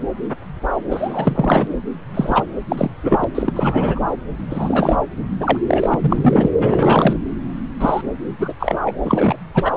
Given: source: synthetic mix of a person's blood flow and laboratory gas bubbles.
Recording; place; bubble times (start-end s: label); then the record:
Doppler ultrasound of blood flow; subclavian vein
0.90-1.68 s: bubbles
2.14-2.44 s: bubbles
2.69-2.90 s: bubbles
3.03-3.25 s: bubbles
3.34-3.53 s: bubbles
3.56-4.00 s: bubbles
4.50-4.96 s: bubbles
5.40-5.57 s: bubbles
5.67-6.50 s: bubbles
6.57-7.17 s: bubbles
7.80-8.02 s: bubbles
8.38-8.53 s: bubbles
8.60-8.78 s: bubbles
8.86-8.92 s: bubbles
9.03-9.36 s: bubbles
9.54-9.72 s: bubbles
From the record:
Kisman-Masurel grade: 333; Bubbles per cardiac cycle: rolling drumbeat, 9 or more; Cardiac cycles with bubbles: 50 to 99%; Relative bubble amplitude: loud (0.450 to 0.775); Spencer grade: 3 (all of the cardiac periods contain showers or single bubble signals, but not dominating or overriding the cardiac motion signals); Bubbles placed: anywhere in the cardiac cycle